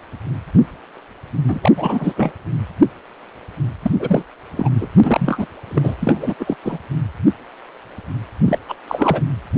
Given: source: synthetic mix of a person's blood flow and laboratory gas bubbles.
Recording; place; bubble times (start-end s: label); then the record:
Doppler ultrasound of blood flow; precordium
1.48-1.72 s: bubbles
1.75-2.33 s: bubbles
3.82-3.91 s: bubbles
3.99-4.24 s: bubbles
4.57-4.69 s: bubbles
4.80-4.88 s: bubbles
5.04-5.46 s: bubbles
5.70-5.96 s: bubbles
6.00-6.34 s: bubbles
6.40-6.55 s: bubbles
6.65-6.79 s: bubbles
8.44-8.58 s: bubbles
8.68-8.75 s: bubbles
8.88-9.21 s: bubbles
From the record:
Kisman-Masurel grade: 333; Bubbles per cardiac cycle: rolling drumbeat, 9 or more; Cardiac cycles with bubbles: 50 to 99%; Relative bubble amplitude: loud (0.450 to 0.775); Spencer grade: 3 (all of the cardiac periods contain showers or single bubble signals, but not dominating or overriding the cardiac motion signals); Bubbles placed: anywhere in the cardiac cycle